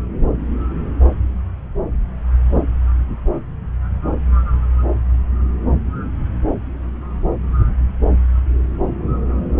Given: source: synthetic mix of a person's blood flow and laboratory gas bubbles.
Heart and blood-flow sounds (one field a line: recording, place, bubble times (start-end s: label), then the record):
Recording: Doppler ultrasound of blood flow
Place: subclavian vein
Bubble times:
no bubbles
From the record:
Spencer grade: 0 (complete lack of bubble signals)